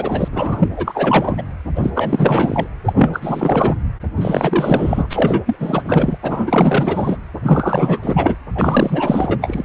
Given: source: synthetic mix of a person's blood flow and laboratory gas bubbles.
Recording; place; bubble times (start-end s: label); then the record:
Doppler ultrasound of blood flow; precordium
0.00-0.28 s: bubbles
0.32-0.69 s: bubbles
0.76-1.43 s: bubbles
1.76-1.91 s: bubbles
1.95-2.67 s: bubbles
2.84-3.74 s: bubbles
4.16-5.44 s: bubbles
5.46-5.57 s: bubbles
5.60-6.18 s: bubbles
6.23-7.17 s: bubbles
7.42-8.00 s: bubbles
8.02-8.36 s: bubbles
8.54-9.38 s: bubbles
9.41-9.63 s: bubbles
From the record:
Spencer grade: 4 (maximum detectable bubble signal sounding continuously throughout systole and diastole of every cardiac period, and overriding the amplitude of the normal cardiac signals); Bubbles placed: anywhere in the cardiac cycle